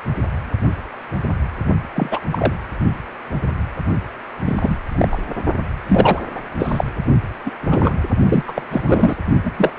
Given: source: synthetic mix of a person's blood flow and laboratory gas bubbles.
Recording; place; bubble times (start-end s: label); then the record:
Doppler ultrasound of blood flow; precordium
1.95-2.21 s: bubbles
2.31-2.54 s: bubbles
4.46-4.77 s: bubbles
4.88-5.18 s: bubbles
5.88-6.20 s: bubbles
6.35-6.41 s: bubbles
6.58-6.84 s: bubbles
7.46-7.50 s: bubbles
7.61-7.94 s: bubbles
8.29-8.44 s: bubbles
8.48-8.62 s: bubbles
8.71-9.17 s: bubbles
9.45-9.52 s: bubbles
9.58-9.73 s: bubbles
9.76-9.79 s: bubbles
From the record:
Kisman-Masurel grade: 233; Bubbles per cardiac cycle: several, 3 to 8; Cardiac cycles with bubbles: 50 to 99%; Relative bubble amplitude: loud (0.450 to 0.775); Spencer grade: 3 (all of the cardiac periods contain showers or single bubble signals, but not dominating or overriding the cardiac motion signals); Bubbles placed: only in the low amplitude regions of the cardiac cycle